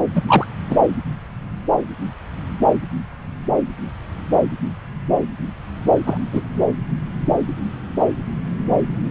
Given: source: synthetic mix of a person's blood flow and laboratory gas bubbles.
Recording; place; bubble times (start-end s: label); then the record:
Doppler ultrasound of blood flow; subclavian vein
0.15-0.22 s: bubbles
0.29-0.46 s: bubbles
0.69-0.77 s: bubbles
6.06-6.17 s: bubbles
6.32-6.42 s: bubbles
From the record:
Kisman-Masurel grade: 123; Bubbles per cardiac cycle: 1 to 2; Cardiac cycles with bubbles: 10 to 50%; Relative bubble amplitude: loud (0.450 to 0.775); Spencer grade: 2 (many but less than half of the cardiac periods contain bubble signals, singularly or in groups); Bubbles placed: anywhere in the cardiac cycle